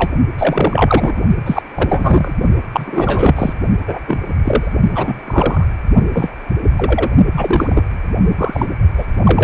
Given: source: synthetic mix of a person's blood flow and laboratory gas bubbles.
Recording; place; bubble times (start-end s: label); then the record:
Doppler ultrasound of blood flow; precordium
0.00-0.12 s: bubbles
0.37-1.21 s: bubbles
1.46-1.62 s: bubbles
1.75-2.33 s: bubbles
2.73-3.53 s: bubbles
3.87-3.99 s: bubbles
4.07-4.18 s: bubbles
4.44-4.73 s: bubbles
4.95-5.20 s: bubbles
5.26-5.65 s: bubbles
6.13-6.29 s: bubbles
6.77-7.10 s: bubbles
7.37-7.83 s: bubbles
8.37-8.66 s: bubbles
8.97-9.05 s: bubbles
9.24-9.44 s: bubbles
From the record:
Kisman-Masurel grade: 243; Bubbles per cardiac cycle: several, 3 to 8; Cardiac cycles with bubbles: 100%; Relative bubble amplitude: loud (0.450 to 0.775); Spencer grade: 3 (all of the cardiac periods contain showers or single bubble signals, but not dominating or overriding the cardiac motion signals); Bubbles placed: only in the low amplitude regions of the cardiac cycle